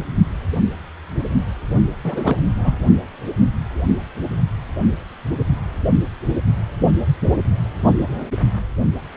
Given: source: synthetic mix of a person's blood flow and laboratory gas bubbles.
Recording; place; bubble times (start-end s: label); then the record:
Doppler ultrasound of blood flow; precordium
2.03-2.36 s: bubbles
2.41-2.78 s: bubbles
From the record:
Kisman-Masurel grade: 212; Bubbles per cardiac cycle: several, 3 to 8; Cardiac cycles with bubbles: 1 to 10%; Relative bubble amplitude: moderate (0.250 to 0.450); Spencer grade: 1 (occasional bubble signal discernible with the cardiac motion signal, with majority of cardiac periods free of bubbles); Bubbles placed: only in the low amplitude regions of the cardiac cycle